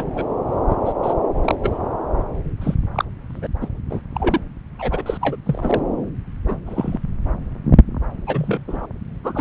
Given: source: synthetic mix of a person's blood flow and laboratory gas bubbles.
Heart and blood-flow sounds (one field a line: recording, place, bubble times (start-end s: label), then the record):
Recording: Doppler ultrasound of blood flow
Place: subclavian vein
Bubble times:
0.00-0.05 s: bubbles
0.14-0.26 s: bubbles
0.69-0.77 s: bubbles
0.85-0.93 s: bubbles
1.02-1.14 s: bubbles
1.45-1.55 s: bubbles
1.63-1.79 s: bubbles
2.60-2.75 s: bubbles
2.94-3.04 s: bubbles
3.30-3.47 s: bubbles
3.61-3.69 s: bubbles
3.89-4.00 s: bubbles
4.14-4.41 s: bubbles
4.79-5.03 s: bubbles
5.06-5.17 s: bubbles
5.21-5.37 s: bubbles
5.46-5.81 s: bubbles
6.46-6.55 s: bubbles
6.66-6.99 s: bubbles
8.26-8.64 s: bubbles
8.67-8.86 s: bubbles
9.24-9.41 s: bubbles
From the record:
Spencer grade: 3 (all of the cardiac periods contain showers or single bubble signals, but not dominating or overriding the cardiac motion signals)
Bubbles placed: anywhere in the cardiac cycle